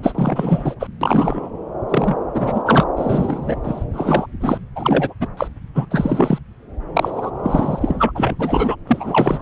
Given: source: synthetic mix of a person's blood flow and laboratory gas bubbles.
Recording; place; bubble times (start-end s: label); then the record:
Doppler ultrasound of blood flow; subclavian vein
0.02-0.74 s: bubbles
0.80-0.87 s: bubbles
1.01-1.50 s: bubbles
1.89-2.19 s: bubbles
2.34-2.62 s: bubbles
2.65-2.85 s: bubbles
2.96-3.56 s: bubbles
3.63-3.84 s: bubbles
3.94-4.27 s: bubbles
4.41-4.58 s: bubbles
4.75-5.14 s: bubbles
5.20-5.28 s: bubbles
5.37-5.48 s: bubbles
5.75-5.86 s: bubbles
5.91-6.39 s: bubbles
6.96-7.31 s: bubbles
7.43-8.12 s: bubbles
8.14-8.35 s: bubbles
8.39-8.76 s: bubbles
8.87-9.42 s: bubbles
From the record:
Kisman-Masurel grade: 343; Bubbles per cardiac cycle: rolling drumbeat, 9 or more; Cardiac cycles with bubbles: 100%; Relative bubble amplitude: loud (0.450 to 0.775); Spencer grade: 3 (all of the cardiac periods contain showers or single bubble signals, but not dominating or overriding the cardiac motion signals); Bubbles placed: anywhere in the cardiac cycle